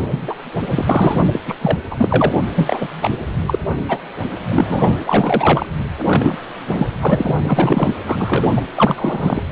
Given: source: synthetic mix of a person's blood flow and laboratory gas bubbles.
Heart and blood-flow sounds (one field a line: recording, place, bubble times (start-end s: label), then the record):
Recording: Doppler ultrasound of blood flow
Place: precordium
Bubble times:
0.00-0.36 s: bubbles
0.70-0.86 s: bubbles
0.89-1.23 s: bubbles
1.32-1.40 s: bubbles
1.47-1.55 s: bubbles
1.61-1.78 s: bubbles
1.90-2.34 s: bubbles
2.54-2.88 s: bubbles
3.02-3.10 s: bubbles
3.46-3.59 s: bubbles
3.88-3.99 s: bubbles
4.51-5.66 s: bubbles
6.05-6.38 s: bubbles
6.68-6.87 s: bubbles
7.02-7.36 s: bubbles
7.43-7.95 s: bubbles
8.06-8.62 s: bubbles
8.75-9.42 s: bubbles
From the record:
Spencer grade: 3 (all of the cardiac periods contain showers or single bubble signals, but not dominating or overriding the cardiac motion signals)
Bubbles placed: anywhere in the cardiac cycle